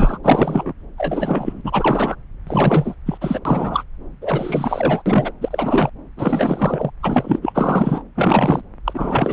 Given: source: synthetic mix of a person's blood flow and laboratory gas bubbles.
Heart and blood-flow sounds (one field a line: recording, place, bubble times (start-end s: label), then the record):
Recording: Doppler ultrasound of blood flow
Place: subclavian vein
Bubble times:
0.00-0.18 s: bubbles
0.23-0.73 s: bubbles
0.97-2.16 s: bubbles
2.46-2.95 s: bubbles
3.05-3.17 s: bubbles
3.21-3.39 s: bubbles
3.45-3.83 s: bubbles
4.21-5.02 s: bubbles
5.05-5.31 s: bubbles
5.41-5.89 s: bubbles
6.17-6.90 s: bubbles
7.02-7.39 s: bubbles
7.42-8.03 s: bubbles
8.16-8.62 s: bubbles
8.85-9.33 s: bubbles
From the record:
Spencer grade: 3 (all of the cardiac periods contain showers or single bubble signals, but not dominating or overriding the cardiac motion signals)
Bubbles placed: anywhere in the cardiac cycle